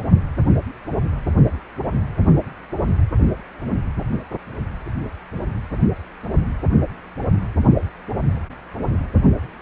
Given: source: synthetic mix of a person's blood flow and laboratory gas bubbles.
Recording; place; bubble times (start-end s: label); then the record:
Doppler ultrasound of blood flow; precordium
no bubbles
From the record:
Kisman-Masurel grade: 000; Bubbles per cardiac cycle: 0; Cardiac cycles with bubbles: 0%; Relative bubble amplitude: no bubbles discernible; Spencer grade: 0 (complete lack of bubble signals)